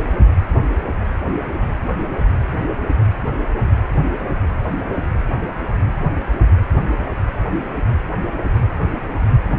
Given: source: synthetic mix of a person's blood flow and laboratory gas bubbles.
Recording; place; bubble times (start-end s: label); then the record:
Doppler ultrasound of blood flow; precordium
no bubbles
From the record:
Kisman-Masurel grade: 000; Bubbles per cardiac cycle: 0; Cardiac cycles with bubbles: 0%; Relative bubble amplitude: no bubbles discernible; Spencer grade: 0 (complete lack of bubble signals)